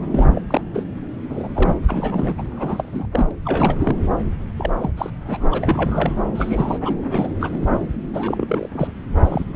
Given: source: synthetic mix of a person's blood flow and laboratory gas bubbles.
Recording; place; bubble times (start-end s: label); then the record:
Doppler ultrasound of blood flow; subclavian vein
0.11-0.28 s: bubbles
0.35-0.42 s: bubbles
0.47-0.61 s: bubbles
0.74-0.83 s: bubbles
1.29-1.49 s: bubbles
1.55-1.76 s: bubbles
1.87-2.35 s: bubbles
2.38-2.42 s: bubbles
2.51-3.07 s: bubbles
3.12-3.27 s: bubbles
3.31-3.33 s: bubbles
3.45-3.96 s: bubbles
4.57-4.91 s: bubbles
4.97-5.10 s: bubbles
5.25-5.45 s: bubbles
5.50-6.15 s: bubbles
6.34-6.96 s: bubbles
7.10-7.29 s: bubbles
7.40-7.58 s: bubbles
7.62-7.67 s: bubbles
8.13-8.69 s: bubbles
8.71-8.93 s: bubbles
9.21-9.45 s: bubbles
From the record:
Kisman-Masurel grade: 342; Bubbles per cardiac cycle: rolling drumbeat, 9 or more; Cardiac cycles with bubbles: 100%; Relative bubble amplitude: moderate (0.250 to 0.450); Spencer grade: 3 (all of the cardiac periods contain showers or single bubble signals, but not dominating or overriding the cardiac motion signals); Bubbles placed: anywhere in the cardiac cycle